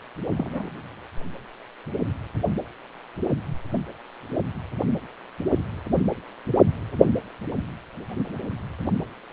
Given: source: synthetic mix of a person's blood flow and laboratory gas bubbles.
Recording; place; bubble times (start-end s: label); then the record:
Doppler ultrasound of blood flow; precordium
0.37-0.75 s: bubbles
From the record:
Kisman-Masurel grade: 211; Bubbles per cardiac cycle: several, 3 to 8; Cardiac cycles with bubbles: 1 to 10%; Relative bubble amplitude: barely perceptible (0.100 to 0.250); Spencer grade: 1 (occasional bubble signal discernible with the cardiac motion signal, with majority of cardiac periods free of bubbles); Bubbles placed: anywhere in the cardiac cycle